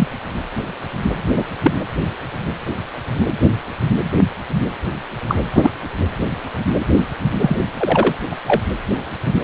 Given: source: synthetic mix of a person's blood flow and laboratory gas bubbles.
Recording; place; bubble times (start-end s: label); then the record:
Doppler ultrasound of blood flow; precordium
0.00-0.08 s: bubbles
1.35-1.44 s: bubbles
1.62-1.72 s: bubbles
5.28-5.38 s: bubbles
5.52-5.70 s: bubbles
7.40-7.57 s: bubbles
7.77-8.15 s: bubbles
8.32-8.35 s: bubbles
8.46-8.61 s: bubbles
From the record:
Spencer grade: 2 (many but less than half of the cardiac periods contain bubble signals, singularly or in groups); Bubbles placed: anywhere in the cardiac cycle